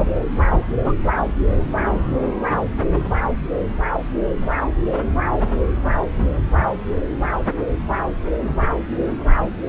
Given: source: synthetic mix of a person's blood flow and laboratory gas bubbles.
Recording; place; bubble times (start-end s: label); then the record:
Doppler ultrasound of blood flow; subclavian vein
0.48-0.61 s: bubbles
0.84-0.93 s: bubbles
From the record:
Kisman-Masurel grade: 113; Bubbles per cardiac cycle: 1 to 2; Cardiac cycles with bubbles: 1 to 10%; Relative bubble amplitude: loud (0.450 to 0.775); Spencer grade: 1 (occasional bubble signal discernible with the cardiac motion signal, with majority of cardiac periods free of bubbles); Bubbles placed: anywhere in the cardiac cycle